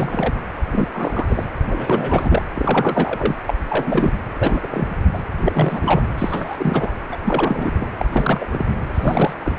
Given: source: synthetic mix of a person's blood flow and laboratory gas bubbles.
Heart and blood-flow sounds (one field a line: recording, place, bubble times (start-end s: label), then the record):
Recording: Doppler ultrasound of blood flow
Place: precordium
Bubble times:
0.00-0.43 s: bubbles
0.72-0.88 s: bubbles
0.93-1.48 s: bubbles
1.65-2.42 s: bubbles
2.54-3.35 s: bubbles
3.46-3.54 s: bubbles
3.68-4.13 s: bubbles
4.39-4.67 s: bubbles
4.71-4.89 s: bubbles
5.12-5.18 s: bubbles
5.44-6.01 s: bubbles
6.17-6.92 s: bubbles
7.11-7.17 s: bubbles
7.23-7.89 s: bubbles
7.97-8.05 s: bubbles
8.12-8.46 s: bubbles
8.51-8.65 s: bubbles
8.94-9.33 s: bubbles
9.42-9.52 s: bubbles
From the record:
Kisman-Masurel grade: 343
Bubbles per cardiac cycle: rolling drumbeat, 9 or more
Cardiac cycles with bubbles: 100%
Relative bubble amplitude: loud (0.450 to 0.775)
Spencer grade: 3 (all of the cardiac periods contain showers or single bubble signals, but not dominating or overriding the cardiac motion signals)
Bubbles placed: anywhere in the cardiac cycle